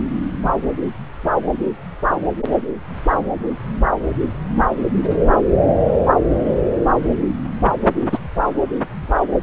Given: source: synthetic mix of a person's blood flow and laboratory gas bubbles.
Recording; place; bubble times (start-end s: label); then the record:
Doppler ultrasound of blood flow; subclavian vein
0.00-0.02 s: bubbles
8.12-8.18 s: bubbles
From the record:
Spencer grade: 1 (occasional bubble signal discernible with the cardiac motion signal, with majority of cardiac periods free of bubbles); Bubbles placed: anywhere in the cardiac cycle